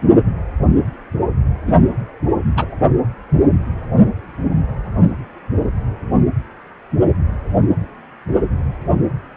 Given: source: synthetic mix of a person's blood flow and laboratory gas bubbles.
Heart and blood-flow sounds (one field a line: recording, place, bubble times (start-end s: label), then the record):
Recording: Doppler ultrasound of blood flow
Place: precordium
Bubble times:
1.67-1.72 s: bubbles
2.57-2.67 s: bubbles
From the record:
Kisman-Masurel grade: 123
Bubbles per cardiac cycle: 1 to 2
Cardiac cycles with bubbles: 10 to 50%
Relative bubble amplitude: loud (0.450 to 0.775)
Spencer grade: 2 (many but less than half of the cardiac periods contain bubble signals, singularly or in groups)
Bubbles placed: anywhere in the cardiac cycle